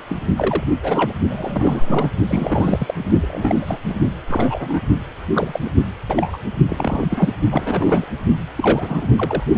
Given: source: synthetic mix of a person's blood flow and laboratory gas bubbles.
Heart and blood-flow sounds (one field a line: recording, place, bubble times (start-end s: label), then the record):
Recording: Doppler ultrasound of blood flow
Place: precordium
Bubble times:
0.09-0.16 s: bubbles
0.36-0.64 s: bubbles
0.82-1.12 s: bubbles
1.29-2.11 s: bubbles
2.27-2.94 s: bubbles
3.21-3.79 s: bubbles
3.90-3.95 s: bubbles
4.27-4.81 s: bubbles
5.33-5.60 s: bubbles
5.64-5.70 s: bubbles
6.07-6.38 s: bubbles
6.69-7.05 s: bubbles
7.10-7.29 s: bubbles
7.51-8.04 s: bubbles
8.55-9.06 s: bubbles
9.16-9.44 s: bubbles
9.53-9.58 s: bubbles
From the record:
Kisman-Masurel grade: 242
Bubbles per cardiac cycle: several, 3 to 8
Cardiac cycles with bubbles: 100%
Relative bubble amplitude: moderate (0.250 to 0.450)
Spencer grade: 3 (all of the cardiac periods contain showers or single bubble signals, but not dominating or overriding the cardiac motion signals)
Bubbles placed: only in the low amplitude regions of the cardiac cycle